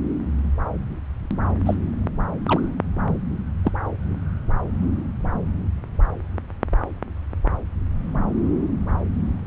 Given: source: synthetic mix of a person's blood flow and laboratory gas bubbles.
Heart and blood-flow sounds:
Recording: Doppler ultrasound of blood flow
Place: subclavian vein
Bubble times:
1.65-1.75 s: bubbles
2.48-2.60 s: bubbles
3.65-3.71 s: bubbles
From the record:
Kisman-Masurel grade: 122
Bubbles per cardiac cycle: 1 to 2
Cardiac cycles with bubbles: 10 to 50%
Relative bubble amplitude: moderate (0.250 to 0.450)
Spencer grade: 2 (many but less than half of the cardiac periods contain bubble signals, singularly or in groups)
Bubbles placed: anywhere in the cardiac cycle

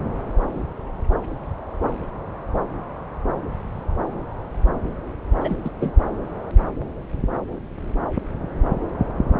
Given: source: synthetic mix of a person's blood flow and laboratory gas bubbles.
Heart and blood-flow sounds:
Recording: Doppler ultrasound of blood flow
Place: subclavian vein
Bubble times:
5.41-5.57 s: bubbles
5.64-5.70 s: bubbles
5.80-5.91 s: bubbles
From the record:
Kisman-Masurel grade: 212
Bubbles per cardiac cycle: several, 3 to 8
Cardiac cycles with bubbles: 1 to 10%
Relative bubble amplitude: moderate (0.250 to 0.450)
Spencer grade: 1 (occasional bubble signal discernible with the cardiac motion signal, with majority of cardiac periods free of bubbles)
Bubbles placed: anywhere in the cardiac cycle

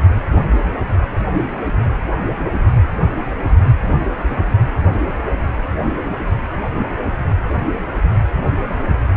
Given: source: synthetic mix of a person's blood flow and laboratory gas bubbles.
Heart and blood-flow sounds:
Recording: Doppler ultrasound of blood flow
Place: precordium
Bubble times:
no bubbles
From the record:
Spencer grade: 0 (complete lack of bubble signals)

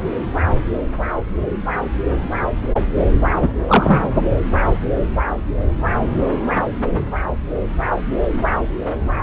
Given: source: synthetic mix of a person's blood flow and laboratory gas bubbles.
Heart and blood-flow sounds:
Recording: Doppler ultrasound of blood flow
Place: subclavian vein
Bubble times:
3.42-3.52 s: bubbles
3.68-4.12 s: bubbles
From the record:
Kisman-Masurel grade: 223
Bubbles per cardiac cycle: several, 3 to 8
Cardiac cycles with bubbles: 10 to 50%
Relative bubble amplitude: loud (0.450 to 0.775)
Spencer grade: 2 (many but less than half of the cardiac periods contain bubble signals, singularly or in groups)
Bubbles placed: anywhere in the cardiac cycle

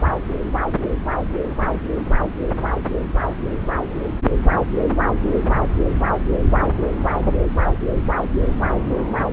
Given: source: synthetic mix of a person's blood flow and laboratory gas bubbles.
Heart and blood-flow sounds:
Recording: Doppler ultrasound of blood flow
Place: subclavian vein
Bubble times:
no bubbles
From the record:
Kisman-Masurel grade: 000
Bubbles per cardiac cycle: 0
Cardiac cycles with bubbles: 0%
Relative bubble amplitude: no bubbles discernible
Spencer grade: 0 (complete lack of bubble signals)

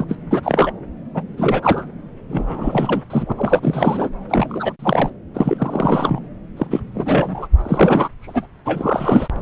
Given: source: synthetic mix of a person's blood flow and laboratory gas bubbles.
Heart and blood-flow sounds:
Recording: Doppler ultrasound of blood flow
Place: subclavian vein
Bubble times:
0.00-0.04 s: bubbles
0.09-0.16 s: bubbles
0.30-0.71 s: bubbles
1.14-1.22 s: bubbles
1.37-1.91 s: bubbles
2.29-3.02 s: bubbles
3.10-3.26 s: bubbles
3.29-3.32 s: bubbles
3.38-3.60 s: bubbles
3.62-4.10 s: bubbles
4.29-4.73 s: bubbles
4.79-5.10 s: bubbles
5.34-6.21 s: bubbles
6.57-6.67 s: bubbles
6.71-6.80 s: bubbles
6.94-7.48 s: bubbles
7.58-8.09 s: bubbles
8.22-8.46 s: bubbles
8.65-9.28 s: bubbles
From the record:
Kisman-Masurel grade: 343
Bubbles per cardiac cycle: rolling drumbeat, 9 or more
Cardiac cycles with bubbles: 100%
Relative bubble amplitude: loud (0.450 to 0.775)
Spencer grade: 3 (all of the cardiac periods contain showers or single bubble signals, but not dominating or overriding the cardiac motion signals)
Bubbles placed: anywhere in the cardiac cycle

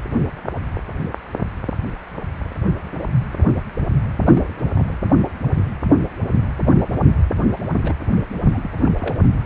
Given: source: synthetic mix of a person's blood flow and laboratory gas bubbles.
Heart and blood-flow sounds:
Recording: Doppler ultrasound of blood flow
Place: precordium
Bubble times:
4.17-4.71 s: bubbles
4.74-4.83 s: bubbles
4.88-4.93 s: bubbles
7.82-7.95 s: bubbles
8.40-8.70 s: bubbles
8.86-8.91 s: bubbles
8.99-9.22 s: bubbles
From the record:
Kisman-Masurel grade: 221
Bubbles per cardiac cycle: several, 3 to 8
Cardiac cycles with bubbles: 10 to 50%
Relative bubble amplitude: barely perceptible (0.100 to 0.250)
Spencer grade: 2 (many but less than half of the cardiac periods contain bubble signals, singularly or in groups)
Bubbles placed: anywhere in the cardiac cycle

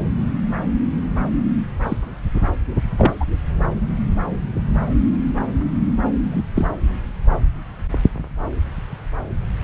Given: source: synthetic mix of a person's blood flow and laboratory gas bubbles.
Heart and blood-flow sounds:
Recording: Doppler ultrasound of blood flow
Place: subclavian vein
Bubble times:
1.83-1.97 s: bubbles
2.98-3.12 s: bubbles
3.20-3.25 s: bubbles
6.30-6.42 s: bubbles
6.55-6.73 s: bubbles
From the record:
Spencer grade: 2 (many but less than half of the cardiac periods contain bubble signals, singularly or in groups)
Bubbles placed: anywhere in the cardiac cycle

